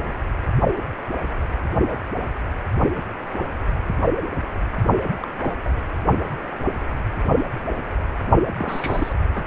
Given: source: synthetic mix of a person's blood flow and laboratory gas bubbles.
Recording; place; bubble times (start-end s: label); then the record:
Doppler ultrasound of blood flow; precordium
5.20-5.27 s: bubbles
5.44-5.52 s: bubbles
5.62-5.75 s: bubbles
8.58-9.13 s: bubbles
9.33-9.44 s: bubbles
From the record:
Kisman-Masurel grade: 221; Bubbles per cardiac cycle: several, 3 to 8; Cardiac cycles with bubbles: 10 to 50%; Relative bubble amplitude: barely perceptible (0.100 to 0.250); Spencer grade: 2 (many but less than half of the cardiac periods contain bubble signals, singularly or in groups); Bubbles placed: only in the low amplitude regions of the cardiac cycle